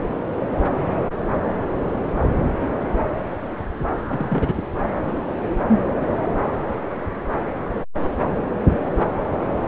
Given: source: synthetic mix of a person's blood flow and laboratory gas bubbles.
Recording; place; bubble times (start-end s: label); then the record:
Doppler ultrasound of blood flow; subclavian vein
4.09-4.68 s: bubbles
From the record:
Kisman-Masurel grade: 211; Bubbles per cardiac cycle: several, 3 to 8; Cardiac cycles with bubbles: 1 to 10%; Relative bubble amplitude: barely perceptible (0.100 to 0.250); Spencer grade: 1 (occasional bubble signal discernible with the cardiac motion signal, with majority of cardiac periods free of bubbles); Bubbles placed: anywhere in the cardiac cycle